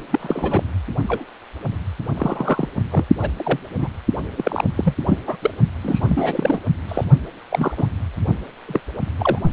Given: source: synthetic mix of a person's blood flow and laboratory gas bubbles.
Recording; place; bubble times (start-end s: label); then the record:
Doppler ultrasound of blood flow; precordium
0.10-0.63 s: bubbles
1.07-1.25 s: bubbles
2.17-2.69 s: bubbles
2.90-3.04 s: bubbles
3.21-3.31 s: bubbles
3.37-3.60 s: bubbles
3.78-3.88 s: bubbles
4.37-4.64 s: bubbles
4.77-4.95 s: bubbles
5.07-5.18 s: bubbles
5.27-5.37 s: bubbles
5.42-5.50 s: bubbles
5.83-6.59 s: bubbles
6.88-7.04 s: bubbles
7.51-7.71 s: bubbles
7.77-7.88 s: bubbles
8.68-8.80 s: bubbles
9.18-9.38 s: bubbles
From the record:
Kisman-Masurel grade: 232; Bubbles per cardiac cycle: several, 3 to 8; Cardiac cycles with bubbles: 50 to 99%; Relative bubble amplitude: moderate (0.250 to 0.450); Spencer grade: 3 (all of the cardiac periods contain showers or single bubble signals, but not dominating or overriding the cardiac motion signals); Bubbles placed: only in the low amplitude regions of the cardiac cycle